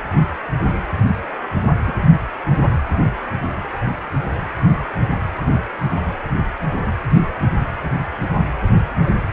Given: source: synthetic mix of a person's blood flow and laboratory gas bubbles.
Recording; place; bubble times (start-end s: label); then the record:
Doppler ultrasound of blood flow; precordium
1.87-1.96 s: bubbles
From the record:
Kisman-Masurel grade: 111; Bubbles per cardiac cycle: 1 to 2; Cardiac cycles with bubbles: 1 to 10%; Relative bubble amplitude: barely perceptible (0.100 to 0.250); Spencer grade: 1 (occasional bubble signal discernible with the cardiac motion signal, with majority of cardiac periods free of bubbles); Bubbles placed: anywhere in the cardiac cycle